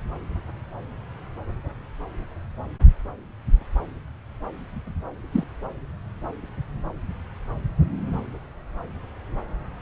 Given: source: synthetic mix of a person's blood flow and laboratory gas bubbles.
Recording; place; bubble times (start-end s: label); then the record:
Doppler ultrasound of blood flow; subclavian vein
5.31-5.44 s: bubbles
From the record:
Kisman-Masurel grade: 112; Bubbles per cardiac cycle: 1 to 2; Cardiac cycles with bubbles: 1 to 10%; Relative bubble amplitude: moderate (0.250 to 0.450); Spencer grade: 1 (occasional bubble signal discernible with the cardiac motion signal, with majority of cardiac periods free of bubbles); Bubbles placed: anywhere in the cardiac cycle